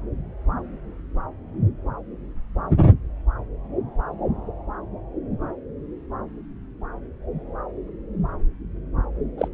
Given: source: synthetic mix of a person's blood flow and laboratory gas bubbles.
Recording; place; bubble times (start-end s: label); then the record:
Doppler ultrasound of blood flow; subclavian vein
9.38-9.48 s: bubbles
From the record:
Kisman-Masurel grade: 112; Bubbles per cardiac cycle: 1 to 2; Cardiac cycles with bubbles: 1 to 10%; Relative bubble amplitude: moderate (0.250 to 0.450); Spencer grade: 1 (occasional bubble signal discernible with the cardiac motion signal, with majority of cardiac periods free of bubbles); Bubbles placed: anywhere in the cardiac cycle